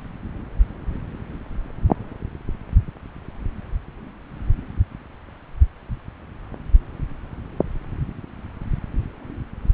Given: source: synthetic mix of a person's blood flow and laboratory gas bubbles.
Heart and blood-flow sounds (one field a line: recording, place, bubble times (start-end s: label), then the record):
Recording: Doppler ultrasound of blood flow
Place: subclavian vein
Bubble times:
no bubbles
From the record:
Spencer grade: 0 (complete lack of bubble signals)